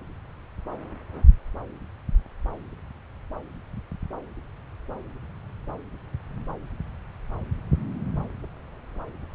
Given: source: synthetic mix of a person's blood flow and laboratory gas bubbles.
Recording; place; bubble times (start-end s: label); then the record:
Doppler ultrasound of blood flow; subclavian vein
no bubbles
From the record:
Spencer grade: 0 (complete lack of bubble signals)